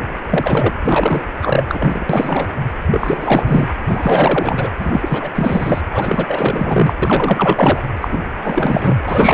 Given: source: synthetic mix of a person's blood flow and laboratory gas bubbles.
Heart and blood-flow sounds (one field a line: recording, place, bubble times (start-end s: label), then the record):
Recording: Doppler ultrasound of blood flow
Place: precordium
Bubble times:
0.30-0.72 s: bubbles
0.85-1.23 s: bubbles
1.42-1.65 s: bubbles
1.68-2.06 s: bubbles
2.09-2.47 s: bubbles
2.91-3.73 s: bubbles
3.86-4.69 s: bubbles
4.79-5.29 s: bubbles
5.35-5.81 s: bubbles
5.93-6.94 s: bubbles
7.02-7.79 s: bubbles
8.01-8.20 s: bubbles
8.43-8.99 s: bubbles
9.08-9.34 s: bubbles
From the record:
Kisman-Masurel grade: 444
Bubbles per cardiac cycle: continuous sound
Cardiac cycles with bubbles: 100%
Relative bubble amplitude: maximal (0.775 to 0.999)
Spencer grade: 4 (maximum detectable bubble signal sounding continuously throughout systole and diastole of every cardiac period, and overriding the amplitude of the normal cardiac signals)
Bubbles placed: anywhere in the cardiac cycle